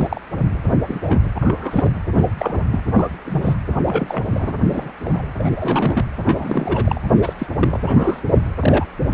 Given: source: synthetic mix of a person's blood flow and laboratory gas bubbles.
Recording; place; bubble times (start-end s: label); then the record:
Doppler ultrasound of blood flow; precordium
0.00-0.21 s: bubbles
0.88-1.17 s: bubbles
1.35-1.93 s: bubbles
2.13-2.58 s: bubbles
2.71-2.83 s: bubbles
2.94-3.08 s: bubbles
3.25-3.55 s: bubbles
3.85-4.25 s: bubbles
4.34-4.55 s: bubbles
4.64-4.92 s: bubbles
5.04-5.09 s: bubbles
5.14-5.23 s: bubbles
5.38-6.06 s: bubbles
6.25-7.01 s: bubbles
7.21-7.33 s: bubbles
7.38-7.46 s: bubbles
7.59-7.80 s: bubbles
7.87-8.20 s: bubbles
8.59-8.85 s: bubbles
9.01-9.06 s: bubbles
From the record:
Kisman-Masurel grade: 232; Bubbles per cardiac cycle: several, 3 to 8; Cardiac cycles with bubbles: 50 to 99%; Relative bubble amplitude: moderate (0.250 to 0.450); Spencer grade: 3 (all of the cardiac periods contain showers or single bubble signals, but not dominating or overriding the cardiac motion signals); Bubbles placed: anywhere in the cardiac cycle